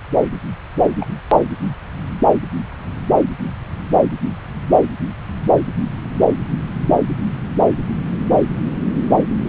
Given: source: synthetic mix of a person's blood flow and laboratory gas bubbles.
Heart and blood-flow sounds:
Doppler ultrasound of blood flow; subclavian vein
1.00-1.07 s: bubbles
From the record:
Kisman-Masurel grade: 111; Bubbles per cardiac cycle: 1 to 2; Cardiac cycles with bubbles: 1 to 10%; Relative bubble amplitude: barely perceptible (0.100 to 0.250); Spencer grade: 1 (occasional bubble signal discernible with the cardiac motion signal, with majority of cardiac periods free of bubbles); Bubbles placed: anywhere in the cardiac cycle

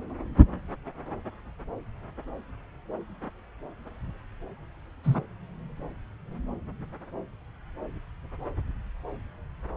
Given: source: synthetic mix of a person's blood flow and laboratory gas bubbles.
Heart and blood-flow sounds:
Doppler ultrasound of blood flow; subclavian vein
5.04-5.22 s: bubbles
From the record:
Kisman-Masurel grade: 112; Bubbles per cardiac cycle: 1 to 2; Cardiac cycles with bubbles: 1 to 10%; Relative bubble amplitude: moderate (0.250 to 0.450); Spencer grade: 1 (occasional bubble signal discernible with the cardiac motion signal, with majority of cardiac periods free of bubbles); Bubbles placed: anywhere in the cardiac cycle

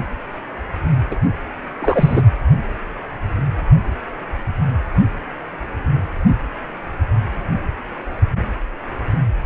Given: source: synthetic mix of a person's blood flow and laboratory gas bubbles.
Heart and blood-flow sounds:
Doppler ultrasound of blood flow; precordium
1.11-1.16 s: bubbles
1.81-2.22 s: bubbles
From the record:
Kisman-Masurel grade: 213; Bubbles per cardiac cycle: several, 3 to 8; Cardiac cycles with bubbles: 1 to 10%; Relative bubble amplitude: loud (0.450 to 0.775); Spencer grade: 1 (occasional bubble signal discernible with the cardiac motion signal, with majority of cardiac periods free of bubbles); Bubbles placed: anywhere in the cardiac cycle

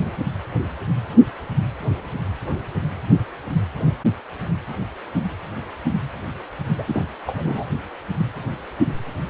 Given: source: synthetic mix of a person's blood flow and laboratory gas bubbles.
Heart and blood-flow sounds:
Doppler ultrasound of blood flow; precordium
6.78-6.83 s: bubbles
6.87-7.04 s: bubbles
7.27-7.65 s: bubbles
From the record:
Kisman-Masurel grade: 211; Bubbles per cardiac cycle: several, 3 to 8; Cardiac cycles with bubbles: 1 to 10%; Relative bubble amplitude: barely perceptible (0.100 to 0.250); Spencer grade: 1 (occasional bubble signal discernible with the cardiac motion signal, with majority of cardiac periods free of bubbles); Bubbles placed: only in the low amplitude regions of the cardiac cycle

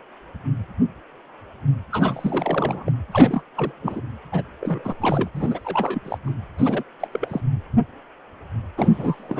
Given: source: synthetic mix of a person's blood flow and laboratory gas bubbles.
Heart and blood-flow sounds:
Doppler ultrasound of blood flow; precordium
1.92-2.92 s: bubbles
3.12-3.42 s: bubbles
3.56-3.73 s: bubbles
3.81-4.01 s: bubbles
4.31-4.43 s: bubbles
4.61-4.95 s: bubbles
5.01-5.29 s: bubbles
5.35-6.02 s: bubbles
6.05-6.18 s: bubbles
6.26-6.34 s: bubbles
6.58-6.83 s: bubbles
7.00-7.07 s: bubbles
7.12-7.40 s: bubbles
8.76-9.40 s: bubbles
From the record:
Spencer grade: 3 (all of the cardiac periods contain showers or single bubble signals, but not dominating or overriding the cardiac motion signals); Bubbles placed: anywhere in the cardiac cycle

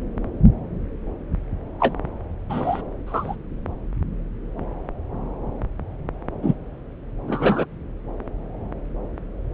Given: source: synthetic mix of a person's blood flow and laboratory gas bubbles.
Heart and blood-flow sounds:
Doppler ultrasound of blood flow; subclavian vein
1.79-1.94 s: bubbles
2.50-2.82 s: bubbles
3.06-3.36 s: bubbles
6.43-6.54 s: bubbles
7.28-7.66 s: bubbles
From the record:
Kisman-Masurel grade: 123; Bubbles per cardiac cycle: 1 to 2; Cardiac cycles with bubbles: 10 to 50%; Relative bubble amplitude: loud (0.450 to 0.775); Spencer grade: 2 (many but less than half of the cardiac periods contain bubble signals, singularly or in groups); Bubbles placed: anywhere in the cardiac cycle

